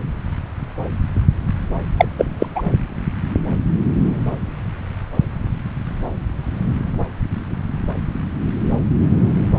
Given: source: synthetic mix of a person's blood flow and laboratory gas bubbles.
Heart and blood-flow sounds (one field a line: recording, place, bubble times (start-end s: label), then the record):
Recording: Doppler ultrasound of blood flow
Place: subclavian vein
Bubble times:
1.97-2.05 s: bubbles
2.17-2.25 s: bubbles
2.40-2.46 s: bubbles
2.55-2.62 s: bubbles
From the record:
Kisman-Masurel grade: 213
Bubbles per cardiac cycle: several, 3 to 8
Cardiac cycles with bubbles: 1 to 10%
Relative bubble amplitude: loud (0.450 to 0.775)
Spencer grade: 1 (occasional bubble signal discernible with the cardiac motion signal, with majority of cardiac periods free of bubbles)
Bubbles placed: anywhere in the cardiac cycle